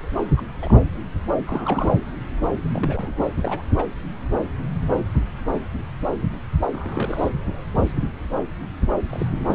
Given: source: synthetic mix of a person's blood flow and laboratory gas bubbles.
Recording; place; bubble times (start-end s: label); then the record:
Doppler ultrasound of blood flow; subclavian vein
0.37-0.42 s: bubbles
0.61-0.73 s: bubbles
1.47-1.95 s: bubbles
2.74-3.25 s: bubbles
3.42-3.62 s: bubbles
3.77-3.86 s: bubbles
6.72-7.29 s: bubbles
9.10-9.28 s: bubbles
9.45-9.55 s: bubbles
From the record:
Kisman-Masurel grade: 221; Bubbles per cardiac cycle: several, 3 to 8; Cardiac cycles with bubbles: 10 to 50%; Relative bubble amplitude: barely perceptible (0.100 to 0.250); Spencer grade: 2 (many but less than half of the cardiac periods contain bubble signals, singularly or in groups); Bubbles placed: anywhere in the cardiac cycle